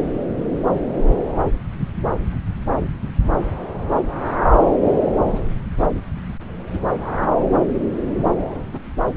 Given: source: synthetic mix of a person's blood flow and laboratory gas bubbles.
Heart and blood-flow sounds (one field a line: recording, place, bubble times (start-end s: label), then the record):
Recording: Doppler ultrasound of blood flow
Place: subclavian vein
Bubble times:
8.73-8.79 s: bubbles
From the record:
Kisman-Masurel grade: 112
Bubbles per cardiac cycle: 1 to 2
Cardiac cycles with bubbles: 1 to 10%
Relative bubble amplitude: moderate (0.250 to 0.450)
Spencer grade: 1 (occasional bubble signal discernible with the cardiac motion signal, with majority of cardiac periods free of bubbles)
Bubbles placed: anywhere in the cardiac cycle